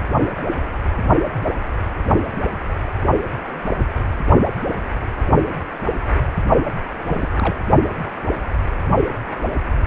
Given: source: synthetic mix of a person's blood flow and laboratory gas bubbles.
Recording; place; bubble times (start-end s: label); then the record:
Doppler ultrasound of blood flow; precordium
7.08-7.29 s: bubbles
7.37-7.54 s: bubbles
From the record:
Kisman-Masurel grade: 211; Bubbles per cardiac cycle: several, 3 to 8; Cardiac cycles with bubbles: 1 to 10%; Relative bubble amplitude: barely perceptible (0.100 to 0.250); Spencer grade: 1 (occasional bubble signal discernible with the cardiac motion signal, with majority of cardiac periods free of bubbles); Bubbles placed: only in the low amplitude regions of the cardiac cycle